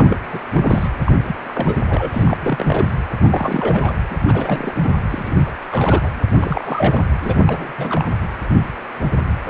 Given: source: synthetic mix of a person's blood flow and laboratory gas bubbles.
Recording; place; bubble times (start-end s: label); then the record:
Doppler ultrasound of blood flow; precordium
0.00-0.16 s: bubbles
0.31-0.40 s: bubbles
0.54-0.88 s: bubbles
1.06-1.12 s: bubbles
1.27-1.35 s: bubbles
1.44-1.76 s: bubbles
1.88-2.37 s: bubbles
2.40-2.90 s: bubbles
3.23-3.94 s: bubbles
4.10-4.16 s: bubbles
4.28-4.75 s: bubbles
4.83-4.89 s: bubbles
5.09-5.37 s: bubbles
5.46-5.51 s: bubbles
5.71-6.09 s: bubbles
6.38-7.03 s: bubbles
7.21-7.72 s: bubbles
7.78-8.10 s: bubbles
From the record:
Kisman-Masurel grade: 332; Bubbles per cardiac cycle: rolling drumbeat, 9 or more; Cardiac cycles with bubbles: 50 to 99%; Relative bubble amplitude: moderate (0.250 to 0.450); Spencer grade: 3 (all of the cardiac periods contain showers or single bubble signals, but not dominating or overriding the cardiac motion signals); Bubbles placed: anywhere in the cardiac cycle